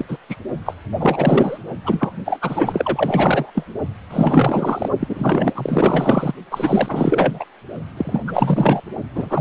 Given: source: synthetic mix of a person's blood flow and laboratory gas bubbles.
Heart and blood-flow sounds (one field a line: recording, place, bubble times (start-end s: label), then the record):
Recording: Doppler ultrasound of blood flow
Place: precordium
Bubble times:
0.00-0.05 s: bubbles
0.07-0.18 s: bubbles
0.29-0.36 s: bubbles
0.66-0.74 s: bubbles
0.99-1.58 s: bubbles
1.84-2.12 s: bubbles
2.25-3.51 s: bubbles
3.54-3.65 s: bubbles
4.10-4.89 s: bubbles
4.99-6.33 s: bubbles
6.51-7.46 s: bubbles
7.97-8.20 s: bubbles
8.27-8.81 s: bubbles
9.15-9.41 s: bubbles
From the record:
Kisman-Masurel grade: 444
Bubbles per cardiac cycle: continuous sound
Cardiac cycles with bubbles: 100%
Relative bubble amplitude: maximal (0.775 to 0.999)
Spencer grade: 4 (maximum detectable bubble signal sounding continuously throughout systole and diastole of every cardiac period, and overriding the amplitude of the normal cardiac signals)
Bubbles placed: only in the low amplitude regions of the cardiac cycle